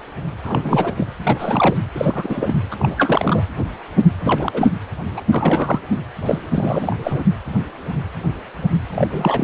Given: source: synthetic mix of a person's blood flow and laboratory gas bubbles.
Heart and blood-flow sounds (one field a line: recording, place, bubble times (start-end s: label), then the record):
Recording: Doppler ultrasound of blood flow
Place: precordium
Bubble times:
0.44-0.93 s: bubbles
0.97-1.06 s: bubbles
1.23-1.77 s: bubbles
1.94-2.55 s: bubbles
2.71-2.75 s: bubbles
2.79-3.45 s: bubbles
4.21-4.69 s: bubbles
5.17-5.22 s: bubbles
5.31-5.79 s: bubbles
5.91-5.99 s: bubbles
6.22-6.39 s: bubbles
6.52-6.96 s: bubbles
7.04-7.24 s: bubbles
8.96-9.08 s: bubbles
9.11-9.44 s: bubbles
From the record:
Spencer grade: 3 (all of the cardiac periods contain showers or single bubble signals, but not dominating or overriding the cardiac motion signals)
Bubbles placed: anywhere in the cardiac cycle